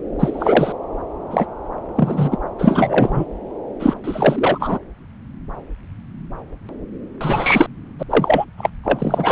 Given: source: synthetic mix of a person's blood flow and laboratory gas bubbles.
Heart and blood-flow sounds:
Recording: Doppler ultrasound of blood flow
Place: subclavian vein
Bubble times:
0.19-0.72 s: bubbles
1.31-1.46 s: bubbles
1.96-2.38 s: bubbles
2.58-3.25 s: bubbles
3.79-3.94 s: bubbles
4.04-4.79 s: bubbles
7.21-7.67 s: bubbles
7.99-8.03 s: bubbles
8.09-8.45 s: bubbles
8.57-8.70 s: bubbles
8.83-9.32 s: bubbles
From the record:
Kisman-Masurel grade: 233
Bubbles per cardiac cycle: several, 3 to 8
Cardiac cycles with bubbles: 50 to 99%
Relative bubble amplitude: loud (0.450 to 0.775)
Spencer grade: 3 (all of the cardiac periods contain showers or single bubble signals, but not dominating or overriding the cardiac motion signals)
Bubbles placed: anywhere in the cardiac cycle

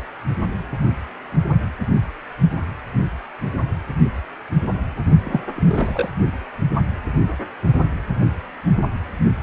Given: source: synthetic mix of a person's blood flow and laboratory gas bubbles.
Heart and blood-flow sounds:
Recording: Doppler ultrasound of blood flow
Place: precordium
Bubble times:
5.24-5.43 s: bubbles
5.56-6.10 s: bubbles
From the record:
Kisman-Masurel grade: 211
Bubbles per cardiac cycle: several, 3 to 8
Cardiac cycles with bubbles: 1 to 10%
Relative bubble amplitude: barely perceptible (0.100 to 0.250)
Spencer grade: 1 (occasional bubble signal discernible with the cardiac motion signal, with majority of cardiac periods free of bubbles)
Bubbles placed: only in the low amplitude regions of the cardiac cycle

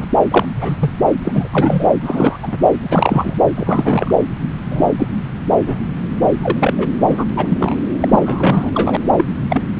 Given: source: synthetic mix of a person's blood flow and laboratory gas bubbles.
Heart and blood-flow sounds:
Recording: Doppler ultrasound of blood flow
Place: subclavian vein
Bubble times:
0.00-0.04 s: bubbles
0.30-0.46 s: bubbles
0.55-0.76 s: bubbles
0.79-0.90 s: bubbles
1.25-1.48 s: bubbles
1.52-1.88 s: bubbles
2.02-2.37 s: bubbles
2.43-2.56 s: bubbles
2.80-3.35 s: bubbles
3.57-4.15 s: bubbles
4.71-4.94 s: bubbles
4.99-5.08 s: bubbles
5.59-5.80 s: bubbles
6.42-6.58 s: bubbles
6.60-6.74 s: bubbles
6.78-6.87 s: bubbles
7.08-7.24 s: bubbles
7.29-7.32 s: bubbles
7.36-7.75 s: bubbles
8.00-8.71 s: bubbles
8.74-8.97 s: bubbles
9.17-9.25 s: bubbles
9.49-9.61 s: bubbles
From the record:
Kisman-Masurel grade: 243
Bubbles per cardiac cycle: several, 3 to 8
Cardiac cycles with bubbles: 100%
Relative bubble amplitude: loud (0.450 to 0.775)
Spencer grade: 3 (all of the cardiac periods contain showers or single bubble signals, but not dominating or overriding the cardiac motion signals)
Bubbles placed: anywhere in the cardiac cycle

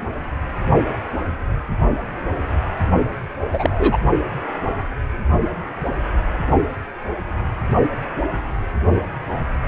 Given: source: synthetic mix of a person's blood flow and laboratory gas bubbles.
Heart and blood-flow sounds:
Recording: Doppler ultrasound of blood flow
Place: precordium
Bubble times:
3.52-4.00 s: bubbles
From the record:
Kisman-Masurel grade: 123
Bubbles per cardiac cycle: 1 to 2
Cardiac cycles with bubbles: 10 to 50%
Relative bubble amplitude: loud (0.450 to 0.775)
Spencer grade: 2 (many but less than half of the cardiac periods contain bubble signals, singularly or in groups)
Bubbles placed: only in the low amplitude regions of the cardiac cycle

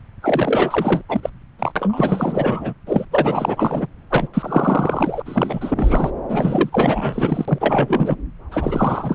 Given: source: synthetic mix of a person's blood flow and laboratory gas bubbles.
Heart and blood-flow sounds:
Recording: Doppler ultrasound of blood flow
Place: subclavian vein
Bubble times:
0.22-1.02 s: bubbles
1.08-1.30 s: bubbles
1.58-1.72 s: bubbles
1.75-2.73 s: bubbles
2.87-3.05 s: bubbles
3.11-3.87 s: bubbles
4.10-4.28 s: bubbles
4.33-5.22 s: bubbles
5.25-6.12 s: bubbles
6.29-6.70 s: bubbles
6.72-8.16 s: bubbles
8.51-9.14 s: bubbles
From the record:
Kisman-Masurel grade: 444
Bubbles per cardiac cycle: continuous sound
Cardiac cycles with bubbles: 100%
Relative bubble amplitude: maximal (0.775 to 0.999)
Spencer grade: 4 (maximum detectable bubble signal sounding continuously throughout systole and diastole of every cardiac period, and overriding the amplitude of the normal cardiac signals)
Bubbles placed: anywhere in the cardiac cycle

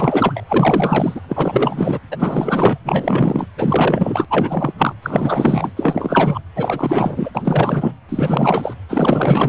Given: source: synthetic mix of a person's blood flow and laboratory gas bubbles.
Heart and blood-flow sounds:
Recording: Doppler ultrasound of blood flow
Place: precordium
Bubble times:
0.00-0.43 s: bubbles
0.48-1.21 s: bubbles
1.28-1.99 s: bubbles
2.10-2.78 s: bubbles
2.85-3.46 s: bubbles
3.58-4.26 s: bubbles
4.30-4.73 s: bubbles
4.78-4.93 s: bubbles
5.02-5.71 s: bubbles
5.77-6.40 s: bubbles
6.55-7.30 s: bubbles
7.35-7.92 s: bubbles
8.09-8.74 s: bubbles
8.88-9.48 s: bubbles
From the record:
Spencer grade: 4 (maximum detectable bubble signal sounding continuously throughout systole and diastole of every cardiac period, and overriding the amplitude of the normal cardiac signals)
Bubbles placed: anywhere in the cardiac cycle

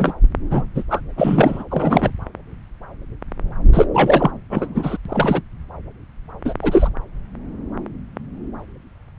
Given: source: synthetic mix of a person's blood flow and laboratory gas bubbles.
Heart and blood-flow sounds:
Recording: Doppler ultrasound of blood flow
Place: subclavian vein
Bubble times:
0.00-0.13 s: bubbles
0.50-0.66 s: bubbles
0.75-0.83 s: bubbles
0.90-1.01 s: bubbles
1.16-1.63 s: bubbles
1.70-2.12 s: bubbles
3.73-3.86 s: bubbles
3.93-4.31 s: bubbles
4.50-4.97 s: bubbles
5.08-5.42 s: bubbles
6.44-6.54 s: bubbles
6.62-6.90 s: bubbles
From the record:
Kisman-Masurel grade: 223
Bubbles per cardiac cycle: several, 3 to 8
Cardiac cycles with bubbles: 10 to 50%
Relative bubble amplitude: loud (0.450 to 0.775)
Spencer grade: 2 (many but less than half of the cardiac periods contain bubble signals, singularly or in groups)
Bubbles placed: anywhere in the cardiac cycle

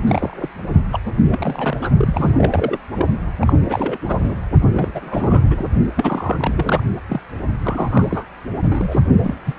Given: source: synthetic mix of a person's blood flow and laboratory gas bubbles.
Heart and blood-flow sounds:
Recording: Doppler ultrasound of blood flow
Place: precordium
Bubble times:
0.06-0.49 s: bubbles
0.91-1.00 s: bubbles
1.05-1.12 s: bubbles
1.17-1.77 s: bubbles
1.81-1.91 s: bubbles
1.98-2.77 s: bubbles
2.98-3.06 s: bubbles
3.41-3.53 s: bubbles
3.69-3.98 s: bubbles
4.02-4.36 s: bubbles
4.72-4.92 s: bubbles
4.94-5.64 s: bubbles
5.96-6.83 s: bubbles
7.08-7.21 s: bubbles
7.62-8.25 s: bubbles
8.63-8.99 s: bubbles
9.20-9.34 s: bubbles
9.45-9.53 s: bubbles
From the record:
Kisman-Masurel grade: 342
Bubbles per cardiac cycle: rolling drumbeat, 9 or more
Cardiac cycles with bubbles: 100%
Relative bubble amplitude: moderate (0.250 to 0.450)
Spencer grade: 3 (all of the cardiac periods contain showers or single bubble signals, but not dominating or overriding the cardiac motion signals)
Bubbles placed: only in the low amplitude regions of the cardiac cycle

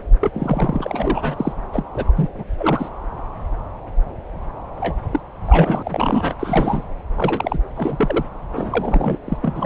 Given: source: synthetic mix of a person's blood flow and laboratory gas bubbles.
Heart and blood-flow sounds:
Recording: Doppler ultrasound of blood flow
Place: subclavian vein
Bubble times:
0.21-0.31 s: bubbles
0.34-1.53 s: bubbles
1.72-1.84 s: bubbles
1.94-2.12 s: bubbles
2.17-2.30 s: bubbles
2.34-2.44 s: bubbles
2.58-2.90 s: bubbles
4.80-4.96 s: bubbles
5.11-5.21 s: bubbles
5.45-6.34 s: bubbles
6.40-6.83 s: bubbles
7.16-7.58 s: bubbles
7.77-8.25 s: bubbles
8.53-9.19 s: bubbles
9.26-9.38 s: bubbles
9.41-9.66 s: bubbles
From the record:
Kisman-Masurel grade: 332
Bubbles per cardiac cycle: rolling drumbeat, 9 or more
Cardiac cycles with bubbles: 50 to 99%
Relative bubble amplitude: moderate (0.250 to 0.450)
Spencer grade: 3 (all of the cardiac periods contain showers or single bubble signals, but not dominating or overriding the cardiac motion signals)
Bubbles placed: anywhere in the cardiac cycle

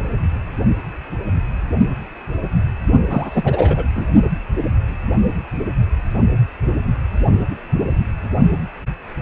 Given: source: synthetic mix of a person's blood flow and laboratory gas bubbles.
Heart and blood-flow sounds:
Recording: Doppler ultrasound of blood flow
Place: precordium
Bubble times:
3.10-3.83 s: bubbles
3.96-4.06 s: bubbles
From the record:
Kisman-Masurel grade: 222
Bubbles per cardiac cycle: several, 3 to 8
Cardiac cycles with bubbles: 10 to 50%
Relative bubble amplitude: moderate (0.250 to 0.450)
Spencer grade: 2 (many but less than half of the cardiac periods contain bubble signals, singularly or in groups)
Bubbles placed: only in the low amplitude regions of the cardiac cycle

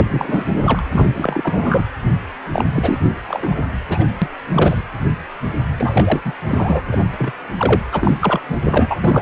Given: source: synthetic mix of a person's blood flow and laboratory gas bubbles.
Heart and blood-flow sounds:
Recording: Doppler ultrasound of blood flow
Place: precordium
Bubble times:
0.00-0.46 s: bubbles
0.53-0.80 s: bubbles
0.91-1.10 s: bubbles
1.15-1.86 s: bubbles
2.53-2.66 s: bubbles
2.75-2.99 s: bubbles
3.28-3.65 s: bubbles
3.89-4.04 s: bubbles
4.21-4.28 s: bubbles
4.54-4.82 s: bubbles
5.77-6.22 s: bubbles
6.25-6.33 s: bubbles
6.49-6.82 s: bubbles
6.91-6.99 s: bubbles
7.13-7.33 s: bubbles
7.57-7.81 s: bubbles
7.92-8.17 s: bubbles
8.21-8.40 s: bubbles
8.48-8.56 s: bubbles
8.64-8.96 s: bubbles
9.01-9.22 s: bubbles
From the record:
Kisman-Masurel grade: 343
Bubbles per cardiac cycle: rolling drumbeat, 9 or more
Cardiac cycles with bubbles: 100%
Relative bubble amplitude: loud (0.450 to 0.775)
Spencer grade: 3 (all of the cardiac periods contain showers or single bubble signals, but not dominating or overriding the cardiac motion signals)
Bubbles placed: anywhere in the cardiac cycle

